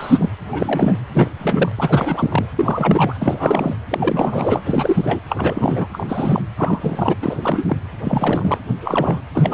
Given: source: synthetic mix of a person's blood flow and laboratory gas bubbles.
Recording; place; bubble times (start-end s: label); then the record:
Doppler ultrasound of blood flow; precordium
0.00-0.30 s: bubbles
0.52-0.98 s: bubbles
1.13-1.29 s: bubbles
1.39-1.71 s: bubbles
1.77-2.46 s: bubbles
2.56-3.14 s: bubbles
3.21-3.75 s: bubbles
3.90-4.61 s: bubbles
4.64-5.21 s: bubbles
5.29-5.87 s: bubbles
5.92-6.42 s: bubbles
6.57-7.15 s: bubbles
7.21-7.37 s: bubbles
7.42-7.77 s: bubbles
8.04-8.59 s: bubbles
8.82-9.21 s: bubbles
9.35-9.54 s: bubbles
From the record:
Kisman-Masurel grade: 342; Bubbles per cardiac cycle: rolling drumbeat, 9 or more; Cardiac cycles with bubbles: 100%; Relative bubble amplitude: moderate (0.250 to 0.450); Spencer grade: 3 (all of the cardiac periods contain showers or single bubble signals, but not dominating or overriding the cardiac motion signals); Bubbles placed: anywhere in the cardiac cycle